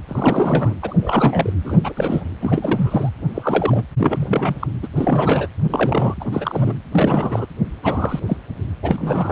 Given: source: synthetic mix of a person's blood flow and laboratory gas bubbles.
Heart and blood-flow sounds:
Doppler ultrasound of blood flow; precordium
0.08-0.75 s: bubbles
0.82-1.56 s: bubbles
1.65-1.79 s: bubbles
1.83-1.93 s: bubbles
1.96-2.24 s: bubbles
2.41-3.09 s: bubbles
3.35-3.82 s: bubbles
3.98-4.55 s: bubbles
4.59-4.67 s: bubbles
4.82-4.88 s: bubbles
4.96-5.47 s: bubbles
5.70-6.14 s: bubbles
6.20-6.76 s: bubbles
6.92-7.46 s: bubbles
7.82-8.20 s: bubbles
8.26-8.37 s: bubbles
8.82-9.32 s: bubbles
From the record:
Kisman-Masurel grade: 342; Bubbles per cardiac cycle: rolling drumbeat, 9 or more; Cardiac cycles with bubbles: 100%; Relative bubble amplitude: moderate (0.250 to 0.450); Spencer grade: 3 (all of the cardiac periods contain showers or single bubble signals, but not dominating or overriding the cardiac motion signals); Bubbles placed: anywhere in the cardiac cycle

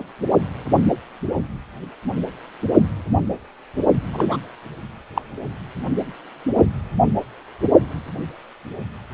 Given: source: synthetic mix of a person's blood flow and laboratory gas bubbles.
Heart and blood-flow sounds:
Doppler ultrasound of blood flow; precordium
4.12-4.37 s: bubbles
5.15-5.22 s: bubbles
From the record:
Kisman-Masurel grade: 212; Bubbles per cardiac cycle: several, 3 to 8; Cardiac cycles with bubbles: 1 to 10%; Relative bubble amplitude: moderate (0.250 to 0.450); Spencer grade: 1 (occasional bubble signal discernible with the cardiac motion signal, with majority of cardiac periods free of bubbles); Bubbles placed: only in the low amplitude regions of the cardiac cycle

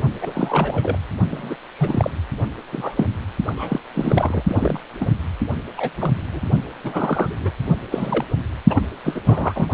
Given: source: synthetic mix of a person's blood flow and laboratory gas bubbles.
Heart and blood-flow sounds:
Doppler ultrasound of blood flow; precordium
0.21-0.97 s: bubbles
1.30-1.55 s: bubbles
1.75-2.10 s: bubbles
2.72-3.06 s: bubbles
3.46-3.81 s: bubbles
3.93-4.44 s: bubbles
4.47-4.81 s: bubbles
4.99-5.09 s: bubbles
5.77-5.90 s: bubbles
5.97-6.20 s: bubbles
6.32-6.42 s: bubbles
6.84-7.36 s: bubbles
7.42-7.52 s: bubbles
7.91-8.24 s: bubbles
8.70-8.83 s: bubbles
9.04-9.21 s: bubbles
9.26-9.68 s: bubbles
From the record:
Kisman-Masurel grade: 242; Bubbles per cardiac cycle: several, 3 to 8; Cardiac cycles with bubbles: 100%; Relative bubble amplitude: moderate (0.250 to 0.450); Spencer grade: 3 (all of the cardiac periods contain showers or single bubble signals, but not dominating or overriding the cardiac motion signals); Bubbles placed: only in the low amplitude regions of the cardiac cycle

